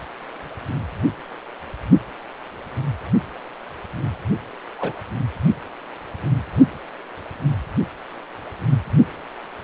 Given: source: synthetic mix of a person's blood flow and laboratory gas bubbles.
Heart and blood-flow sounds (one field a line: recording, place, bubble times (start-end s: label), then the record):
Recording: Doppler ultrasound of blood flow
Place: precordium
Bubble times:
4.78-4.93 s: bubbles
From the record:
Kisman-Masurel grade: 122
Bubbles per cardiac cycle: 1 to 2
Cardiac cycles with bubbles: 10 to 50%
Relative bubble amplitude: moderate (0.250 to 0.450)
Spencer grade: 2 (many but less than half of the cardiac periods contain bubble signals, singularly or in groups)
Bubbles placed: only in the low amplitude regions of the cardiac cycle